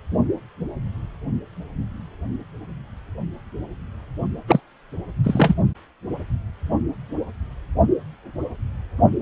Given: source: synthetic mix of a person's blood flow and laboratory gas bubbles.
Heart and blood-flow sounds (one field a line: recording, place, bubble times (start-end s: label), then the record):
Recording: Doppler ultrasound of blood flow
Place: precordium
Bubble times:
4.47-4.60 s: bubbles
5.23-5.54 s: bubbles
From the record:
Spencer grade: 2 (many but less than half of the cardiac periods contain bubble signals, singularly or in groups)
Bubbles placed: only in the low amplitude regions of the cardiac cycle